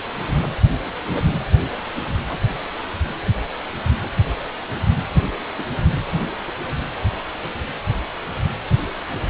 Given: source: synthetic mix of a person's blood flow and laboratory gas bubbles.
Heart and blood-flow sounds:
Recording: Doppler ultrasound of blood flow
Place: precordium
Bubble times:
2.28-2.39 s: bubbles
2.53-2.63 s: bubbles
3.03-3.52 s: bubbles
5.58-5.64 s: bubbles
From the record:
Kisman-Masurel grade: 121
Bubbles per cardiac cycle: 1 to 2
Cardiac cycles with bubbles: 10 to 50%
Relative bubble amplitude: barely perceptible (0.100 to 0.250)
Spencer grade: 2 (many but less than half of the cardiac periods contain bubble signals, singularly or in groups)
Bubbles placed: anywhere in the cardiac cycle

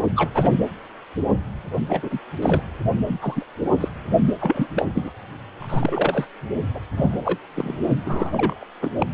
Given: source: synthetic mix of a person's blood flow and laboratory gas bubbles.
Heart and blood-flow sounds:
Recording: Doppler ultrasound of blood flow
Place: precordium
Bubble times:
0.15-0.29 s: bubbles
0.34-0.50 s: bubbles
1.90-2.19 s: bubbles
2.42-2.62 s: bubbles
3.08-3.19 s: bubbles
3.21-3.44 s: bubbles
3.81-3.89 s: bubbles
4.41-4.69 s: bubbles
4.77-4.86 s: bubbles
4.94-5.12 s: bubbles
5.58-6.25 s: bubbles
6.74-6.79 s: bubbles
6.96-7.39 s: bubbles
7.56-7.77 s: bubbles
8.06-8.64 s: bubbles
8.82-8.90 s: bubbles
8.98-9.06 s: bubbles
From the record:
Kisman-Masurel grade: 242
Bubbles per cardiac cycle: several, 3 to 8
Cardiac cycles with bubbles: 100%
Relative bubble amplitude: moderate (0.250 to 0.450)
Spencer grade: 3 (all of the cardiac periods contain showers or single bubble signals, but not dominating or overriding the cardiac motion signals)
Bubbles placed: only in the low amplitude regions of the cardiac cycle

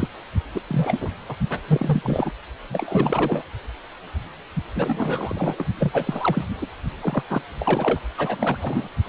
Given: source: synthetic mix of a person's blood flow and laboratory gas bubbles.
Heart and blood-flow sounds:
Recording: Doppler ultrasound of blood flow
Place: precordium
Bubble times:
0.00-0.08 s: bubbles
0.54-0.61 s: bubbles
0.67-1.09 s: bubbles
1.29-1.35 s: bubbles
1.50-1.58 s: bubbles
1.68-2.31 s: bubbles
2.70-3.42 s: bubbles
4.75-5.65 s: bubbles
5.79-6.45 s: bubbles
6.62-6.67 s: bubbles
7.01-7.22 s: bubbles
7.29-7.41 s: bubbles
7.59-8.00 s: bubbles
8.17-8.88 s: bubbles
From the record:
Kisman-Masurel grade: 332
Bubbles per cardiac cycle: rolling drumbeat, 9 or more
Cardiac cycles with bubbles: 50 to 99%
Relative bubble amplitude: moderate (0.250 to 0.450)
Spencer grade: 3 (all of the cardiac periods contain showers or single bubble signals, but not dominating or overriding the cardiac motion signals)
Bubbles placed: only in the low amplitude regions of the cardiac cycle

